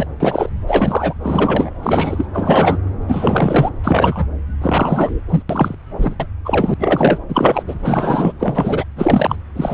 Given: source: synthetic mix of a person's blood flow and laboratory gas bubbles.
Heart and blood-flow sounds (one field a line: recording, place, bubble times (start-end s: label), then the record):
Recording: Doppler ultrasound of blood flow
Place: subclavian vein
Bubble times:
0.00-0.06 s: bubbles
0.20-0.49 s: bubbles
0.67-1.14 s: bubbles
1.24-1.71 s: bubbles
1.83-2.25 s: bubbles
2.33-2.79 s: bubbles
3.08-3.69 s: bubbles
3.83-4.27 s: bubbles
4.62-5.21 s: bubbles
5.29-5.42 s: bubbles
5.49-5.75 s: bubbles
5.98-6.15 s: bubbles
6.20-6.26 s: bubbles
6.45-6.74 s: bubbles
6.79-7.18 s: bubbles
7.29-7.63 s: bubbles
7.67-7.75 s: bubbles
7.82-8.32 s: bubbles
8.39-8.84 s: bubbles
8.96-9.36 s: bubbles
9.55-9.74 s: bubbles
From the record:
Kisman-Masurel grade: 343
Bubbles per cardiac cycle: rolling drumbeat, 9 or more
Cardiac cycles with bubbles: 100%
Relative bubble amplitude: loud (0.450 to 0.775)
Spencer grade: 3 (all of the cardiac periods contain showers or single bubble signals, but not dominating or overriding the cardiac motion signals)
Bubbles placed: anywhere in the cardiac cycle